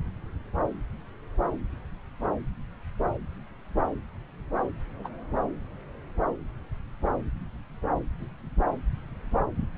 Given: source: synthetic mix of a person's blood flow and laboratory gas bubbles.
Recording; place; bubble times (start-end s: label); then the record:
Doppler ultrasound of blood flow; subclavian vein
5.04-5.08 s: bubbles
From the record:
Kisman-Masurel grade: 111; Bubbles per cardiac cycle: 1 to 2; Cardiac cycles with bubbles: 1 to 10%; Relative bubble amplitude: barely perceptible (0.100 to 0.250); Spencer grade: 1 (occasional bubble signal discernible with the cardiac motion signal, with majority of cardiac periods free of bubbles); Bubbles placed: anywhere in the cardiac cycle